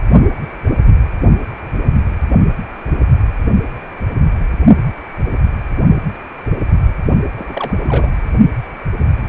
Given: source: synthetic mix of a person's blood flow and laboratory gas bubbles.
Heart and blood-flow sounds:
Doppler ultrasound of blood flow; precordium
7.34-7.74 s: bubbles
7.82-8.12 s: bubbles
From the record:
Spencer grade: 1 (occasional bubble signal discernible with the cardiac motion signal, with majority of cardiac periods free of bubbles); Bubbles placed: only in the low amplitude regions of the cardiac cycle

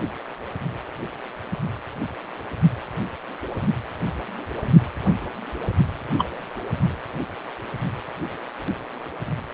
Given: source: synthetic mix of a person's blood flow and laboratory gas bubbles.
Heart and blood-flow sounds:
Doppler ultrasound of blood flow; precordium
6.18-6.29 s: bubbles
From the record:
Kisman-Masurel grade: 112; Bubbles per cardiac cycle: 1 to 2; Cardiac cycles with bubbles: 1 to 10%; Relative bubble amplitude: moderate (0.250 to 0.450); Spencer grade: 1 (occasional bubble signal discernible with the cardiac motion signal, with majority of cardiac periods free of bubbles); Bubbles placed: anywhere in the cardiac cycle

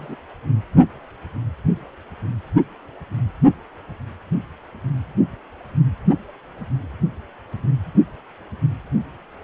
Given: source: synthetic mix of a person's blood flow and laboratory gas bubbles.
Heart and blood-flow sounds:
Doppler ultrasound of blood flow; precordium
0.00-0.16 s: bubbles
From the record:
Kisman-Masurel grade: 111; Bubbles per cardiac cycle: 1 to 2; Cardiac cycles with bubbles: 1 to 10%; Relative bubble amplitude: barely perceptible (0.100 to 0.250); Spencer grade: 1 (occasional bubble signal discernible with the cardiac motion signal, with majority of cardiac periods free of bubbles); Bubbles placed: anywhere in the cardiac cycle

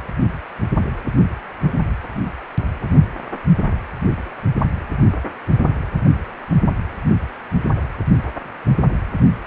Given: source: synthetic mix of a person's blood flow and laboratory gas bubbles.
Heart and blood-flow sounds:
Doppler ultrasound of blood flow; precordium
0.00-0.03 s: bubbles
From the record:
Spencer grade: 1 (occasional bubble signal discernible with the cardiac motion signal, with majority of cardiac periods free of bubbles); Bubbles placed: anywhere in the cardiac cycle

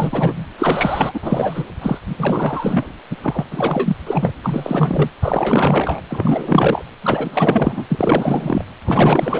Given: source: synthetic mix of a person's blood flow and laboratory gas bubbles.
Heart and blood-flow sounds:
Doppler ultrasound of blood flow; precordium
0.00-0.47 s: bubbles
0.58-1.20 s: bubbles
1.22-1.66 s: bubbles
1.81-1.98 s: bubbles
2.03-2.93 s: bubbles
3.10-3.17 s: bubbles
3.21-3.44 s: bubbles
3.50-3.96 s: bubbles
4.06-4.33 s: bubbles
4.44-5.09 s: bubbles
5.21-6.01 s: bubbles
6.08-6.84 s: bubbles
7.02-7.86 s: bubbles
7.90-8.65 s: bubbles
8.82-9.40 s: bubbles
From the record:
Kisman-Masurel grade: 444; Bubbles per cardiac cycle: continuous sound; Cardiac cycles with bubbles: 100%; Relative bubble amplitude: maximal (0.775 to 0.999); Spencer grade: 4 (maximum detectable bubble signal sounding continuously throughout systole and diastole of every cardiac period, and overriding the amplitude of the normal cardiac signals); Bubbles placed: anywhere in the cardiac cycle

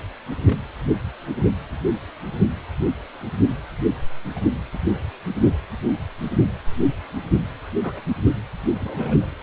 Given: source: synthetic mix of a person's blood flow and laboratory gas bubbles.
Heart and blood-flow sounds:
Doppler ultrasound of blood flow; precordium
0.42-0.58 s: bubbles
4.35-4.40 s: bubbles
4.73-4.77 s: bubbles
4.93-5.03 s: bubbles
5.47-5.54 s: bubbles
7.80-8.02 s: bubbles
8.80-9.29 s: bubbles
From the record:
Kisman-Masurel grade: 121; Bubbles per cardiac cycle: 1 to 2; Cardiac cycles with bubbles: 10 to 50%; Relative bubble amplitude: barely perceptible (0.100 to 0.250); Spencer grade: 2 (many but less than half of the cardiac periods contain bubble signals, singularly or in groups); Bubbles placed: anywhere in the cardiac cycle

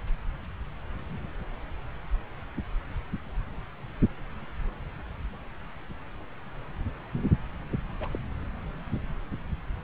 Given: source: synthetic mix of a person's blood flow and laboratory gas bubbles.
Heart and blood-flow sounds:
Doppler ultrasound of blood flow; subclavian vein
8.00-8.08 s: bubbles
8.11-8.19 s: bubbles
From the record:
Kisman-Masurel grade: 121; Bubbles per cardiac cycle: 1 to 2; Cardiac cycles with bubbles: 10 to 50%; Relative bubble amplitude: barely perceptible (0.100 to 0.250); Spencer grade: 2 (many but less than half of the cardiac periods contain bubble signals, singularly or in groups); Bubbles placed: anywhere in the cardiac cycle

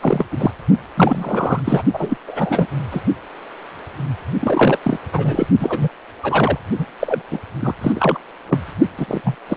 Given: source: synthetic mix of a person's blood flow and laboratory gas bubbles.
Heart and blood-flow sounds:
Doppler ultrasound of blood flow; precordium
0.00-0.26 s: bubbles
0.31-0.51 s: bubbles
0.97-1.82 s: bubbles
1.93-2.17 s: bubbles
2.27-2.67 s: bubbles
2.91-3.02 s: bubbles
4.40-4.79 s: bubbles
4.84-4.99 s: bubbles
5.12-5.47 s: bubbles
5.58-5.88 s: bubbles
6.22-6.58 s: bubbles
6.78-6.86 s: bubbles
7.00-7.22 s: bubbles
7.31-7.40 s: bubbles
7.61-7.75 s: bubbles
7.81-7.92 s: bubbles
7.95-8.18 s: bubbles
8.49-8.58 s: bubbles
8.97-9.35 s: bubbles
9.48-9.56 s: bubbles
From the record:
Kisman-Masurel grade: 333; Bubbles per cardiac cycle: rolling drumbeat, 9 or more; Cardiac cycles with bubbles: 50 to 99%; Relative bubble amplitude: loud (0.450 to 0.775); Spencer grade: 3 (all of the cardiac periods contain showers or single bubble signals, but not dominating or overriding the cardiac motion signals); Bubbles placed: only in the low amplitude regions of the cardiac cycle

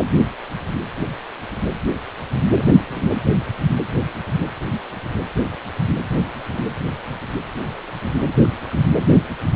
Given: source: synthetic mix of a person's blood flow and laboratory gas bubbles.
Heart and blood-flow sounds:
Doppler ultrasound of blood flow; precordium
2.53-3.22 s: bubbles
8.41-8.57 s: bubbles
8.59-8.87 s: bubbles
8.96-9.02 s: bubbles
From the record:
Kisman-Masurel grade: 211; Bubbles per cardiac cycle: several, 3 to 8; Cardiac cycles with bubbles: 1 to 10%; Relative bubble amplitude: barely perceptible (0.100 to 0.250); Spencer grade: 1 (occasional bubble signal discernible with the cardiac motion signal, with majority of cardiac periods free of bubbles); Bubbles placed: anywhere in the cardiac cycle

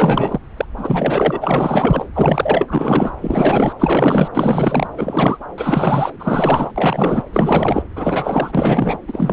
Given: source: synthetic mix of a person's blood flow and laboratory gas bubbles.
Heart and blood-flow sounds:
Doppler ultrasound of blood flow; subclavian vein
0.00-0.38 s: bubbles
0.56-0.66 s: bubbles
0.78-2.06 s: bubbles
2.14-3.13 s: bubbles
3.20-3.73 s: bubbles
3.79-4.28 s: bubbles
4.33-4.87 s: bubbles
4.96-5.38 s: bubbles
5.58-6.12 s: bubbles
6.19-6.71 s: bubbles
6.76-7.25 s: bubbles
7.33-7.84 s: bubbles
7.95-8.52 s: bubbles
8.54-8.98 s: bubbles
9.07-9.33 s: bubbles
From the record:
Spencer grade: 4 (maximum detectable bubble signal sounding continuously throughout systole and diastole of every cardiac period, and overriding the amplitude of the normal cardiac signals); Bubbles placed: anywhere in the cardiac cycle

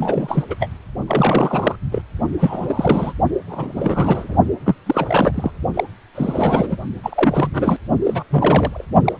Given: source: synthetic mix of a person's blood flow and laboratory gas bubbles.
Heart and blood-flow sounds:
Doppler ultrasound of blood flow; precordium
0.00-0.44 s: bubbles
0.50-0.55 s: bubbles
0.60-0.68 s: bubbles
1.07-1.76 s: bubbles
1.91-2.02 s: bubbles
2.39-3.13 s: bubbles
3.46-4.34 s: bubbles
4.65-4.75 s: bubbles
4.86-5.51 s: bubbles
5.74-5.84 s: bubbles
6.14-6.77 s: bubbles
7.02-7.77 s: bubbles
8.04-8.23 s: bubbles
8.30-8.85 s: bubbles
9.04-9.12 s: bubbles
From the record:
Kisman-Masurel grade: 342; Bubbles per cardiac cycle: rolling drumbeat, 9 or more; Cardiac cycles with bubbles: 100%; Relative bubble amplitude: moderate (0.250 to 0.450); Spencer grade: 3 (all of the cardiac periods contain showers or single bubble signals, but not dominating or overriding the cardiac motion signals); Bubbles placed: only in the low amplitude regions of the cardiac cycle

